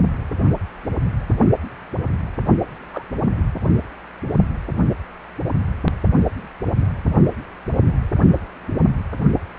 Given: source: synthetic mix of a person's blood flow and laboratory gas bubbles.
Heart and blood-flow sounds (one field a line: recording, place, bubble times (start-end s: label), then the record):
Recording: Doppler ultrasound of blood flow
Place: precordium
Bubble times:
2.92-3.04 s: bubbles
From the record:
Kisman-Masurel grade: 111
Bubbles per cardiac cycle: 1 to 2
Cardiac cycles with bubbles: 1 to 10%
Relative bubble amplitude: barely perceptible (0.100 to 0.250)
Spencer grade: 1 (occasional bubble signal discernible with the cardiac motion signal, with majority of cardiac periods free of bubbles)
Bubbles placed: only in the low amplitude regions of the cardiac cycle